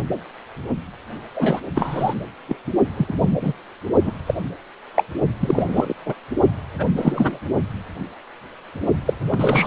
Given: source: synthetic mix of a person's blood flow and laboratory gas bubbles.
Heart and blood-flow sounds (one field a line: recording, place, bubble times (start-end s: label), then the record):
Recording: Doppler ultrasound of blood flow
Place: precordium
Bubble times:
1.34-1.60 s: bubbles
1.75-2.14 s: bubbles
2.48-2.56 s: bubbles
2.97-3.38 s: bubbles
3.41-3.53 s: bubbles
4.03-4.11 s: bubbles
4.26-4.34 s: bubbles
4.96-5.04 s: bubbles
5.40-5.93 s: bubbles
6.05-6.14 s: bubbles
6.78-6.86 s: bubbles
6.96-7.38 s: bubbles
9.06-9.13 s: bubbles
9.28-9.67 s: bubbles
From the record:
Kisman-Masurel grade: 232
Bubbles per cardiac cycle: several, 3 to 8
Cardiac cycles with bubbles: 50 to 99%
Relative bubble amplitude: moderate (0.250 to 0.450)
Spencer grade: 3 (all of the cardiac periods contain showers or single bubble signals, but not dominating or overriding the cardiac motion signals)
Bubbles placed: only in the low amplitude regions of the cardiac cycle